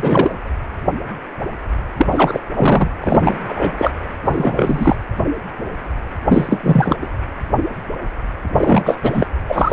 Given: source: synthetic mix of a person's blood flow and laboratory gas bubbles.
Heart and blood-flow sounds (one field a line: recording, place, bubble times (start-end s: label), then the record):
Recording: Doppler ultrasound of blood flow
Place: precordium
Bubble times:
0.00-0.34 s: bubbles
1.97-2.07 s: bubbles
2.11-2.40 s: bubbles
2.55-2.89 s: bubbles
3.02-3.37 s: bubbles
3.48-3.72 s: bubbles
3.78-3.91 s: bubbles
4.25-4.96 s: bubbles
6.27-6.60 s: bubbles
6.63-6.96 s: bubbles
7.01-7.06 s: bubbles
8.54-8.98 s: bubbles
9.01-9.26 s: bubbles
9.48-9.73 s: bubbles
From the record:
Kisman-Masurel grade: 333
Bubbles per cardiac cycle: rolling drumbeat, 9 or more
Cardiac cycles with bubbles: 50 to 99%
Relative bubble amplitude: loud (0.450 to 0.775)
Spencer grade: 3 (all of the cardiac periods contain showers or single bubble signals, but not dominating or overriding the cardiac motion signals)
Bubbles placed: anywhere in the cardiac cycle